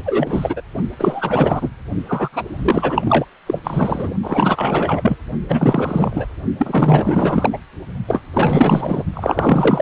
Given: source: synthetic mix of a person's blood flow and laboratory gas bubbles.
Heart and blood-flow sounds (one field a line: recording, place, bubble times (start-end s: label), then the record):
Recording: Doppler ultrasound of blood flow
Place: precordium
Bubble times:
0.05-0.61 s: bubbles
0.99-1.69 s: bubbles
2.08-2.29 s: bubbles
2.32-3.26 s: bubbles
3.46-3.60 s: bubbles
3.64-4.14 s: bubbles
4.23-5.17 s: bubbles
5.49-6.27 s: bubbles
6.58-7.58 s: bubbles
8.07-8.21 s: bubbles
8.34-9.04 s: bubbles
9.13-9.82 s: bubbles
From the record:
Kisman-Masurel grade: 444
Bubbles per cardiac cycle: continuous sound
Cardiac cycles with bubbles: 100%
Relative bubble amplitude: maximal (0.775 to 0.999)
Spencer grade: 4 (maximum detectable bubble signal sounding continuously throughout systole and diastole of every cardiac period, and overriding the amplitude of the normal cardiac signals)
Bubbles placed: only in the low amplitude regions of the cardiac cycle